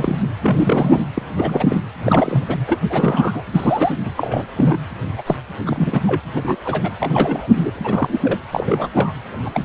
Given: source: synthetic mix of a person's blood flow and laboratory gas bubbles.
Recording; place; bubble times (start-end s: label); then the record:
Doppler ultrasound of blood flow; precordium
0.00-0.22 s: bubbles
0.41-0.99 s: bubbles
1.15-1.22 s: bubbles
1.36-1.83 s: bubbles
2.03-2.44 s: bubbles
2.48-2.56 s: bubbles
2.68-2.81 s: bubbles
2.89-3.43 s: bubbles
3.53-3.92 s: bubbles
4.05-4.11 s: bubbles
4.17-4.45 s: bubbles
4.56-4.78 s: bubbles
5.17-5.23 s: bubbles
5.27-5.35 s: bubbles
5.66-6.00 s: bubbles
6.07-6.21 s: bubbles
6.36-6.42 s: bubbles
6.45-6.56 s: bubbles
6.65-6.90 s: bubbles
7.00-7.71 s: bubbles
7.74-8.39 s: bubbles
8.51-8.88 s: bubbles
8.94-9.12 s: bubbles
9.43-9.65 s: bubbles
From the record:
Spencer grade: 3 (all of the cardiac periods contain showers or single bubble signals, but not dominating or overriding the cardiac motion signals); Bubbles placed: anywhere in the cardiac cycle